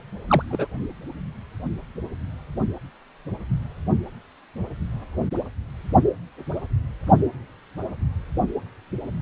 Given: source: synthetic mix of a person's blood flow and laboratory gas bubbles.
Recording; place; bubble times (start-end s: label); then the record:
Doppler ultrasound of blood flow; precordium
0.28-0.42 s: bubbles
0.50-0.67 s: bubbles
From the record:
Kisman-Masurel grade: 212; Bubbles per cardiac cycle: several, 3 to 8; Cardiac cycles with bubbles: 1 to 10%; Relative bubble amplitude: moderate (0.250 to 0.450); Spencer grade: 1 (occasional bubble signal discernible with the cardiac motion signal, with majority of cardiac periods free of bubbles); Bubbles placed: anywhere in the cardiac cycle